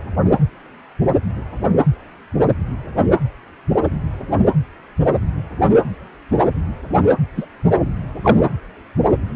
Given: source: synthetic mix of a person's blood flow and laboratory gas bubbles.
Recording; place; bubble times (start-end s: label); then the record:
Doppler ultrasound of blood flow; precordium
7.37-7.46 s: bubbles
8.23-8.43 s: bubbles
From the record:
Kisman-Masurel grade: 123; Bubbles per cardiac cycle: 1 to 2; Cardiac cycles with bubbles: 10 to 50%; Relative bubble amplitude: loud (0.450 to 0.775); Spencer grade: 2 (many but less than half of the cardiac periods contain bubble signals, singularly or in groups); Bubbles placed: anywhere in the cardiac cycle